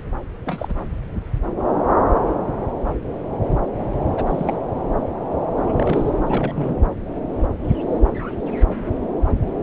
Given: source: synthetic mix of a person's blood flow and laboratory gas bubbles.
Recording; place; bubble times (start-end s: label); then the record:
Doppler ultrasound of blood flow; subclavian vein
0.45-0.74 s: bubbles
4.10-4.57 s: bubbles
5.57-6.13 s: bubbles
6.26-6.75 s: bubbles
From the record:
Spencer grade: 2 (many but less than half of the cardiac periods contain bubble signals, singularly or in groups); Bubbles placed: anywhere in the cardiac cycle